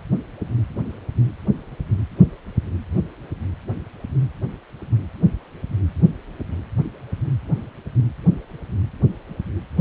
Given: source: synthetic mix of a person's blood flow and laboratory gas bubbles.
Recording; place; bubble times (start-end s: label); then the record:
Doppler ultrasound of blood flow; precordium
no bubbles
From the record:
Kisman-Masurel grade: 000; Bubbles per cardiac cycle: 0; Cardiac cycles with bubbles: 0%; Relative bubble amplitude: no bubbles discernible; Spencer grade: 0 (complete lack of bubble signals)